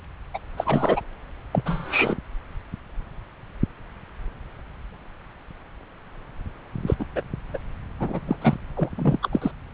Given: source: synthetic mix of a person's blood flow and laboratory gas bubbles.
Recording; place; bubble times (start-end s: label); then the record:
Doppler ultrasound of blood flow; subclavian vein
0.34-0.39 s: bubbles
0.57-1.01 s: bubbles
1.51-2.17 s: bubbles
6.87-6.94 s: bubbles
6.99-7.05 s: bubbles
7.15-7.21 s: bubbles
7.54-7.58 s: bubbles
7.99-8.20 s: bubbles
8.27-8.37 s: bubbles
8.41-8.54 s: bubbles
8.77-8.89 s: bubbles
8.95-9.29 s: bubbles
9.31-9.52 s: bubbles
From the record:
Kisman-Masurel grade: 233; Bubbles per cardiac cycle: several, 3 to 8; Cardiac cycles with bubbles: 50 to 99%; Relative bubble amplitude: loud (0.450 to 0.775); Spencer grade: 3 (all of the cardiac periods contain showers or single bubble signals, but not dominating or overriding the cardiac motion signals); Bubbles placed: anywhere in the cardiac cycle